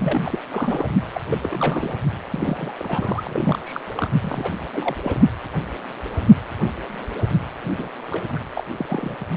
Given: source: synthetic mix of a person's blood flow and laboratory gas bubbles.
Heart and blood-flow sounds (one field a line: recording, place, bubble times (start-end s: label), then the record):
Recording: Doppler ultrasound of blood flow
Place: precordium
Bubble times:
0.00-0.40 s: bubbles
0.51-0.90 s: bubbles
1.12-1.21 s: bubbles
1.31-1.38 s: bubbles
1.42-1.94 s: bubbles
2.30-2.74 s: bubbles
2.79-3.58 s: bubbles
3.64-3.81 s: bubbles
3.95-4.10 s: bubbles
4.21-4.54 s: bubbles
4.73-4.95 s: bubbles
5.02-5.20 s: bubbles
7.77-7.89 s: bubbles
8.10-8.39 s: bubbles
8.55-8.63 s: bubbles
8.77-8.86 s: bubbles
8.88-9.17 s: bubbles
From the record:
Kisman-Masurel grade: 332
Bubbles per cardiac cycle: rolling drumbeat, 9 or more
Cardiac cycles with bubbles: 50 to 99%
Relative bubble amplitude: moderate (0.250 to 0.450)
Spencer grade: 3 (all of the cardiac periods contain showers or single bubble signals, but not dominating or overriding the cardiac motion signals)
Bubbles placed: only in the low amplitude regions of the cardiac cycle